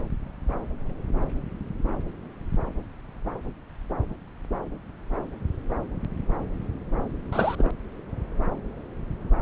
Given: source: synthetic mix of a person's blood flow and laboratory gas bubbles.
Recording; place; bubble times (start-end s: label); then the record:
Doppler ultrasound of blood flow; subclavian vein
7.32-7.55 s: bubbles
7.58-7.70 s: bubbles
From the record:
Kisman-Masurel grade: 212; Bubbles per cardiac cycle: several, 3 to 8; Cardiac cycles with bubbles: 1 to 10%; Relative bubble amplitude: moderate (0.250 to 0.450); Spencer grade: 1 (occasional bubble signal discernible with the cardiac motion signal, with majority of cardiac periods free of bubbles); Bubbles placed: anywhere in the cardiac cycle